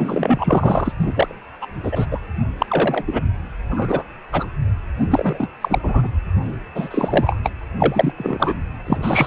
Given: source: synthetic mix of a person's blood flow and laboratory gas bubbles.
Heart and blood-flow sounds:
Doppler ultrasound of blood flow; precordium
0.00-0.92 s: bubbles
1.00-1.35 s: bubbles
1.62-1.67 s: bubbles
1.83-2.06 s: bubbles
2.11-2.20 s: bubbles
2.58-2.66 s: bubbles
2.69-3.21 s: bubbles
3.71-4.04 s: bubbles
4.32-4.48 s: bubbles
5.00-5.07 s: bubbles
5.10-5.48 s: bubbles
5.61-5.79 s: bubbles
5.83-6.08 s: bubbles
6.75-7.39 s: bubbles
7.44-7.51 s: bubbles
7.77-8.12 s: bubbles
8.17-8.54 s: bubbles
8.84-9.27 s: bubbles
From the record:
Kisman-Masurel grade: 243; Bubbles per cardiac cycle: several, 3 to 8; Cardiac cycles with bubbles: 100%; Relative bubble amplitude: loud (0.450 to 0.775); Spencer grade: 3 (all of the cardiac periods contain showers or single bubble signals, but not dominating or overriding the cardiac motion signals); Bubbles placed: anywhere in the cardiac cycle

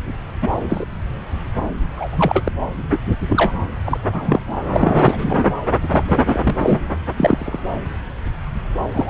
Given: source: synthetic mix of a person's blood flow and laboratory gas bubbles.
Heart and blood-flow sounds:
Doppler ultrasound of blood flow; subclavian vein
0.41-0.50 s: bubbles
0.69-0.85 s: bubbles
1.97-2.08 s: bubbles
2.12-2.51 s: bubbles
2.60-2.65 s: bubbles
2.89-2.98 s: bubbles
3.28-3.52 s: bubbles
3.85-3.98 s: bubbles
4.12-4.40 s: bubbles
4.73-5.54 s: bubbles
5.83-5.88 s: bubbles
5.91-6.03 s: bubbles
6.06-6.79 s: bubbles
7.17-7.60 s: bubbles
8.93-9.10 s: bubbles
From the record:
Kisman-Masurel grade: 233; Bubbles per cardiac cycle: several, 3 to 8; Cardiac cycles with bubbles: 50 to 99%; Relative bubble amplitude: loud (0.450 to 0.775); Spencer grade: 3 (all of the cardiac periods contain showers or single bubble signals, but not dominating or overriding the cardiac motion signals); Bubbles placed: anywhere in the cardiac cycle

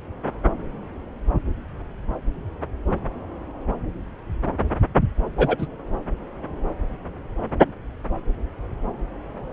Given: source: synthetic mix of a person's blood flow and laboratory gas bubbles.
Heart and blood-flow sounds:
Doppler ultrasound of blood flow; subclavian vein
5.38-5.55 s: bubbles
5.58-5.67 s: bubbles
From the record:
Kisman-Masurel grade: 113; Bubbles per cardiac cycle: 1 to 2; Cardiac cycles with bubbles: 1 to 10%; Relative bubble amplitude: loud (0.450 to 0.775); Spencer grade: 1 (occasional bubble signal discernible with the cardiac motion signal, with majority of cardiac periods free of bubbles); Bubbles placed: anywhere in the cardiac cycle

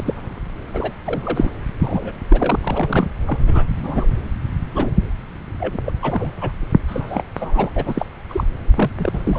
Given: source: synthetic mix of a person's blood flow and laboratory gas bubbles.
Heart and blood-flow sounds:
Doppler ultrasound of blood flow; subclavian vein
0.00-0.14 s: bubbles
0.73-0.92 s: bubbles
1.06-1.50 s: bubbles
1.79-2.14 s: bubbles
2.29-3.10 s: bubbles
3.27-3.39 s: bubbles
3.46-3.65 s: bubbles
3.80-4.11 s: bubbles
4.74-4.90 s: bubbles
5.59-5.78 s: bubbles
5.85-5.90 s: bubbles
6.02-6.51 s: bubbles
6.88-7.23 s: bubbles
7.35-7.70 s: bubbles
7.75-8.05 s: bubbles
8.28-8.44 s: bubbles
8.74-8.91 s: bubbles
8.97-9.39 s: bubbles
From the record:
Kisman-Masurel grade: 242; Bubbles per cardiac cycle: several, 3 to 8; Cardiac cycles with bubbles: 100%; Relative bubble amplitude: moderate (0.250 to 0.450); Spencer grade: 3 (all of the cardiac periods contain showers or single bubble signals, but not dominating or overriding the cardiac motion signals); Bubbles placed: anywhere in the cardiac cycle

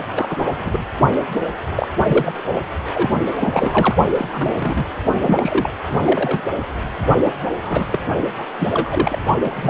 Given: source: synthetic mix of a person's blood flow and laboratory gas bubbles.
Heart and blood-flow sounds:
Doppler ultrasound of blood flow; precordium
0.15-0.49 s: bubbles
0.59-0.83 s: bubbles
1.75-1.88 s: bubbles
2.08-2.32 s: bubbles
2.94-3.09 s: bubbles
3.40-3.93 s: bubbles
4.17-4.29 s: bubbles
4.33-4.85 s: bubbles
5.22-5.69 s: bubbles
5.88-6.00 s: bubbles
6.05-6.41 s: bubbles
7.25-7.31 s: bubbles
7.62-8.00 s: bubbles
8.38-8.44 s: bubbles
8.59-9.18 s: bubbles
9.44-9.69 s: bubbles
From the record:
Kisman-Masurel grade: 242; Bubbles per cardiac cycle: several, 3 to 8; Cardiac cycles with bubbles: 100%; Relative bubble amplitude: moderate (0.250 to 0.450); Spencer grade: 3 (all of the cardiac periods contain showers or single bubble signals, but not dominating or overriding the cardiac motion signals); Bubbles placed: only in the low amplitude regions of the cardiac cycle

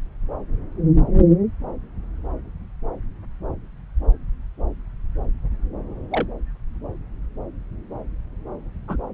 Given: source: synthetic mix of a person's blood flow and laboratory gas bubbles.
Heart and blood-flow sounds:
Doppler ultrasound of blood flow; subclavian vein
6.10-6.26 s: bubbles
8.88-8.97 s: bubbles
From the record:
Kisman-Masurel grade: 122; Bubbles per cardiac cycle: 1 to 2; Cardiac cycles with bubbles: 10 to 50%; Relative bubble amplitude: moderate (0.250 to 0.450); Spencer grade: 2 (many but less than half of the cardiac periods contain bubble signals, singularly or in groups); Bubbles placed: anywhere in the cardiac cycle

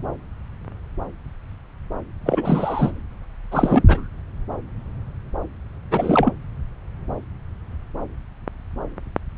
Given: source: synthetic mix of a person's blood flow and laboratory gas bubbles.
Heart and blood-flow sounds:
Doppler ultrasound of blood flow; subclavian vein
2.25-2.91 s: bubbles
3.52-3.83 s: bubbles
3.88-4.07 s: bubbles
5.91-6.31 s: bubbles
From the record:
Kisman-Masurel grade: 223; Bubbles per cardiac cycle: several, 3 to 8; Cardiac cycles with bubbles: 10 to 50%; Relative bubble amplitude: loud (0.450 to 0.775); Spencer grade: 2 (many but less than half of the cardiac periods contain bubble signals, singularly or in groups); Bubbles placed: anywhere in the cardiac cycle

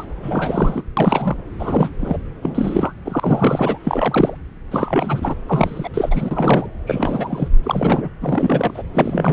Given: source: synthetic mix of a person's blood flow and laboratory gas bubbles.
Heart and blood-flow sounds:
Doppler ultrasound of blood flow; subclavian vein
0.00-0.05 s: bubbles
0.22-0.82 s: bubbles
0.97-1.37 s: bubbles
1.59-1.90 s: bubbles
2.00-2.17 s: bubbles
2.42-2.94 s: bubbles
3.05-3.78 s: bubbles
3.84-4.37 s: bubbles
4.71-5.35 s: bubbles
5.47-5.89 s: bubbles
5.94-6.66 s: bubbles
6.87-7.48 s: bubbles
7.63-8.08 s: bubbles
8.21-8.82 s: bubbles
8.94-9.33 s: bubbles
From the record:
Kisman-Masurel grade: 342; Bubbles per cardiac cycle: rolling drumbeat, 9 or more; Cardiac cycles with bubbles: 100%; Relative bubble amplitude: moderate (0.250 to 0.450); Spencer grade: 3 (all of the cardiac periods contain showers or single bubble signals, but not dominating or overriding the cardiac motion signals); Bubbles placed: anywhere in the cardiac cycle

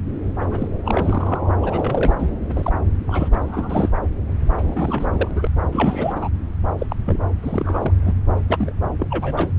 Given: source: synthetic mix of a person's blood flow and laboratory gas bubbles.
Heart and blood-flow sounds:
Doppler ultrasound of blood flow; subclavian vein
0.40-0.68 s: bubbles
0.85-1.40 s: bubbles
1.62-2.12 s: bubbles
2.19-2.29 s: bubbles
2.46-2.73 s: bubbles
3.07-3.29 s: bubbles
3.31-3.39 s: bubbles
3.42-3.90 s: bubbles
4.38-5.31 s: bubbles
5.33-5.47 s: bubbles
5.71-6.29 s: bubbles
6.79-6.96 s: bubbles
7.06-7.20 s: bubbles
7.42-7.93 s: bubbles
8.04-8.14 s: bubbles
8.48-8.72 s: bubbles
8.98-9.52 s: bubbles
From the record:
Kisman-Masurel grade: 342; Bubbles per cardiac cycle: rolling drumbeat, 9 or more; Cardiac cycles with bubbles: 100%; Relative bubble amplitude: moderate (0.250 to 0.450); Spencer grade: 3 (all of the cardiac periods contain showers or single bubble signals, but not dominating or overriding the cardiac motion signals); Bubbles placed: anywhere in the cardiac cycle

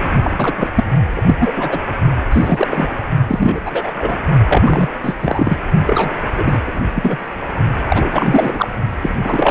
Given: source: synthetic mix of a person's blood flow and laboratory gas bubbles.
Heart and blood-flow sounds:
Doppler ultrasound of blood flow; precordium
0.00-0.09 s: bubbles
0.22-0.71 s: bubbles
0.74-0.84 s: bubbles
1.16-1.21 s: bubbles
1.26-1.35 s: bubbles
1.40-1.51 s: bubbles
1.56-1.80 s: bubbles
2.31-2.68 s: bubbles
2.71-3.04 s: bubbles
3.28-3.60 s: bubbles
3.66-3.91 s: bubbles
3.98-4.18 s: bubbles
4.47-4.89 s: bubbles
5.02-5.58 s: bubbles
5.86-6.11 s: bubbles
6.35-6.61 s: bubbles
6.67-6.80 s: bubbles
6.94-7.29 s: bubbles
7.88-8.68 s: bubbles
9.01-9.15 s: bubbles
9.24-9.51 s: bubbles
From the record:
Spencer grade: 3 (all of the cardiac periods contain showers or single bubble signals, but not dominating or overriding the cardiac motion signals); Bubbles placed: only in the low amplitude regions of the cardiac cycle

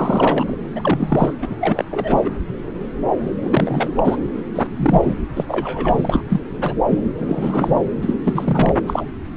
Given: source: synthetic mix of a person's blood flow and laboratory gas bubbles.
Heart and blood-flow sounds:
Doppler ultrasound of blood flow; subclavian vein
0.00-0.56 s: bubbles
0.76-1.33 s: bubbles
1.41-1.55 s: bubbles
1.60-1.85 s: bubbles
1.91-2.30 s: bubbles
3.42-3.90 s: bubbles
3.96-4.17 s: bubbles
4.55-4.67 s: bubbles
4.76-5.15 s: bubbles
5.35-5.45 s: bubbles
5.49-6.21 s: bubbles
6.29-6.40 s: bubbles
6.58-6.80 s: bubbles
6.89-7.00 s: bubbles
7.18-7.83 s: bubbles
8.01-8.13 s: bubbles
8.23-8.73 s: bubbles
8.86-9.05 s: bubbles
From the record:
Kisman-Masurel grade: 332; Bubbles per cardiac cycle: rolling drumbeat, 9 or more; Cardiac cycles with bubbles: 50 to 99%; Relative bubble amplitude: moderate (0.250 to 0.450); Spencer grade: 3 (all of the cardiac periods contain showers or single bubble signals, but not dominating or overriding the cardiac motion signals); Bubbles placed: anywhere in the cardiac cycle

